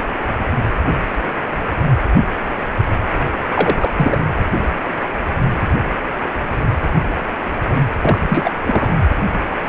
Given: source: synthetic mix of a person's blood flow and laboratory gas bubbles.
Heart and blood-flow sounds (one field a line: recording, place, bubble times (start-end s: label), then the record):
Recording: Doppler ultrasound of blood flow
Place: precordium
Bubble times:
3.54-4.18 s: bubbles
8.02-8.51 s: bubbles
8.65-8.88 s: bubbles
From the record:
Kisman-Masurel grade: 222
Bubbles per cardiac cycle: several, 3 to 8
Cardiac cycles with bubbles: 10 to 50%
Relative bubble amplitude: moderate (0.250 to 0.450)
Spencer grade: 2 (many but less than half of the cardiac periods contain bubble signals, singularly or in groups)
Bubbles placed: anywhere in the cardiac cycle